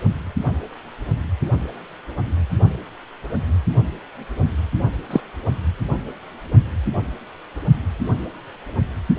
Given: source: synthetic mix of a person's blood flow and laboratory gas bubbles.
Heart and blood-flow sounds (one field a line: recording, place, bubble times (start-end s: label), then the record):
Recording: Doppler ultrasound of blood flow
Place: precordium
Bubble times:
5.10-5.21 s: bubbles
From the record:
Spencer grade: 1 (occasional bubble signal discernible with the cardiac motion signal, with majority of cardiac periods free of bubbles)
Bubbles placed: only in the low amplitude regions of the cardiac cycle